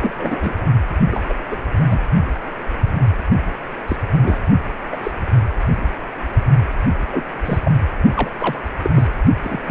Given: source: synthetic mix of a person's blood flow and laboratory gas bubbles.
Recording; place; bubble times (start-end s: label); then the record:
Doppler ultrasound of blood flow; precordium
0.00-0.13 s: bubbles
0.18-0.54 s: bubbles
1.10-1.34 s: bubbles
1.51-1.57 s: bubbles
1.79-2.00 s: bubbles
3.88-3.96 s: bubbles
4.23-4.39 s: bubbles
4.92-4.96 s: bubbles
5.03-5.12 s: bubbles
7.11-7.24 s: bubbles
7.45-7.59 s: bubbles
7.63-7.72 s: bubbles
8.15-8.31 s: bubbles
8.39-8.59 s: bubbles
8.65-8.70 s: bubbles
8.82-8.91 s: bubbles
8.95-9.08 s: bubbles
9.44-9.61 s: bubbles
9.67-9.71 s: bubbles
From the record:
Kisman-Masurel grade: 232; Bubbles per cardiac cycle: several, 3 to 8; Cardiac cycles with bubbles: 50 to 99%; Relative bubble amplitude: moderate (0.250 to 0.450); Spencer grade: 3 (all of the cardiac periods contain showers or single bubble signals, but not dominating or overriding the cardiac motion signals); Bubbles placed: anywhere in the cardiac cycle